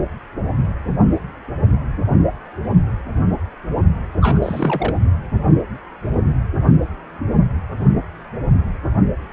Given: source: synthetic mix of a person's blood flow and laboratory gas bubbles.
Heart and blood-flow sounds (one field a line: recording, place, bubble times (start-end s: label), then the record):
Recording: Doppler ultrasound of blood flow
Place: precordium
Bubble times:
4.21-4.38 s: bubbles
4.42-4.96 s: bubbles
From the record:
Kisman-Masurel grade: 222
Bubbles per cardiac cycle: several, 3 to 8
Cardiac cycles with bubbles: 10 to 50%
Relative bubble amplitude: moderate (0.250 to 0.450)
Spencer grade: 2 (many but less than half of the cardiac periods contain bubble signals, singularly or in groups)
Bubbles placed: anywhere in the cardiac cycle